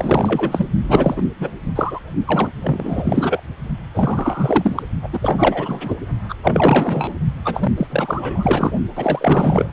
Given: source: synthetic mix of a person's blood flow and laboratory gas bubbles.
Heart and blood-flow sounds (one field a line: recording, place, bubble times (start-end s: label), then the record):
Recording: Doppler ultrasound of blood flow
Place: precordium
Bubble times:
0.00-0.69 s: bubbles
0.84-1.27 s: bubbles
1.39-1.50 s: bubbles
1.75-1.99 s: bubbles
2.25-2.52 s: bubbles
2.62-3.42 s: bubbles
3.94-4.83 s: bubbles
5.02-5.09 s: bubbles
5.12-5.96 s: bubbles
6.29-6.35 s: bubbles
6.43-7.15 s: bubbles
7.45-7.73 s: bubbles
7.77-7.87 s: bubbles
7.90-8.72 s: bubbles
8.96-9.72 s: bubbles
From the record:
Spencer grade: 4 (maximum detectable bubble signal sounding continuously throughout systole and diastole of every cardiac period, and overriding the amplitude of the normal cardiac signals)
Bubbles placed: only in the low amplitude regions of the cardiac cycle